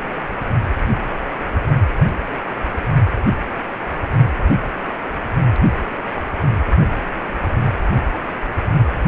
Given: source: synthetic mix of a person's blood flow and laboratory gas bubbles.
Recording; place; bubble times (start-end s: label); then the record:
Doppler ultrasound of blood flow; precordium
no bubbles
From the record:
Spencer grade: 0 (complete lack of bubble signals)